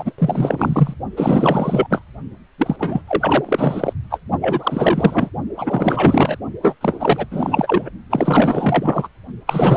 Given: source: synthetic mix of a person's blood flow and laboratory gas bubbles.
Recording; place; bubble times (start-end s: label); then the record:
Doppler ultrasound of blood flow; precordium
0.00-0.13 s: bubbles
0.18-0.94 s: bubbles
1.17-1.87 s: bubbles
1.90-2.02 s: bubbles
2.58-2.76 s: bubbles
2.79-3.02 s: bubbles
3.07-3.93 s: bubbles
4.10-4.20 s: bubbles
4.41-5.30 s: bubbles
5.57-6.37 s: bubbles
6.62-6.76 s: bubbles
6.81-7.26 s: bubbles
7.31-7.89 s: bubbles
8.09-9.08 s: bubbles
9.46-9.77 s: bubbles
From the record:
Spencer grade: 4 (maximum detectable bubble signal sounding continuously throughout systole and diastole of every cardiac period, and overriding the amplitude of the normal cardiac signals); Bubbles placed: only in the low amplitude regions of the cardiac cycle